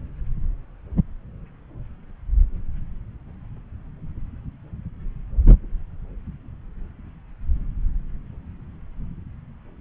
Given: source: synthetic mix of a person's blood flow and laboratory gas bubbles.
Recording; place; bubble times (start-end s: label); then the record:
Doppler ultrasound of blood flow; subclavian vein
no bubbles
From the record:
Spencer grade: 0 (complete lack of bubble signals)